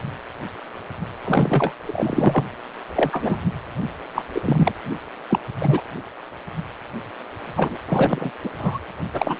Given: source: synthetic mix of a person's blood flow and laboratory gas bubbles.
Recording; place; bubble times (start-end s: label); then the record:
Doppler ultrasound of blood flow; precordium
1.25-1.73 s: bubbles
1.85-2.45 s: bubbles
2.96-3.37 s: bubbles
4.14-4.22 s: bubbles
4.34-4.40 s: bubbles
4.45-4.72 s: bubbles
5.30-5.38 s: bubbles
5.60-5.81 s: bubbles
7.56-7.78 s: bubbles
7.88-8.30 s: bubbles
8.44-8.49 s: bubbles
8.58-8.79 s: bubbles
9.14-9.36 s: bubbles
From the record:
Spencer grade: 3 (all of the cardiac periods contain showers or single bubble signals, but not dominating or overriding the cardiac motion signals); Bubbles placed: anywhere in the cardiac cycle